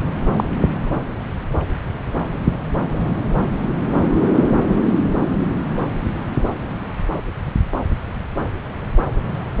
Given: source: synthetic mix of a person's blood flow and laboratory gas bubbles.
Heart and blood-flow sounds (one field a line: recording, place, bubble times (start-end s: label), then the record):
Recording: Doppler ultrasound of blood flow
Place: subclavian vein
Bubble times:
0.36-0.44 s: bubbles
From the record:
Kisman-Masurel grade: 123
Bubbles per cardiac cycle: 1 to 2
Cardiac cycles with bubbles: 10 to 50%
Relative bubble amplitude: loud (0.450 to 0.775)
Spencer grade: 2 (many but less than half of the cardiac periods contain bubble signals, singularly or in groups)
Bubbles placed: anywhere in the cardiac cycle